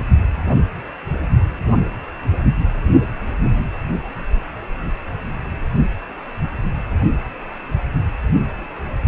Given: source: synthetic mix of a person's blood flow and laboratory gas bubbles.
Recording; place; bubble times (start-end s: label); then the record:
Doppler ultrasound of blood flow; precordium
no bubbles
From the record:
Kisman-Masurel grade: 000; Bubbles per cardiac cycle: 0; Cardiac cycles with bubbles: 0%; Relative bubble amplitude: no bubbles discernible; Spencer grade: 0 (complete lack of bubble signals)